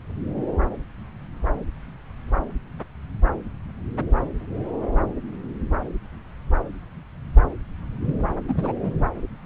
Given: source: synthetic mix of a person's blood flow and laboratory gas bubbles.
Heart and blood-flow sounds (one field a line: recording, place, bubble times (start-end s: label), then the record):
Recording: Doppler ultrasound of blood flow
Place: subclavian vein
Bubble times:
8.04-8.14 s: bubbles
8.48-8.72 s: bubbles
8.83-9.09 s: bubbles
From the record:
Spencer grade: 1 (occasional bubble signal discernible with the cardiac motion signal, with majority of cardiac periods free of bubbles)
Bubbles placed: anywhere in the cardiac cycle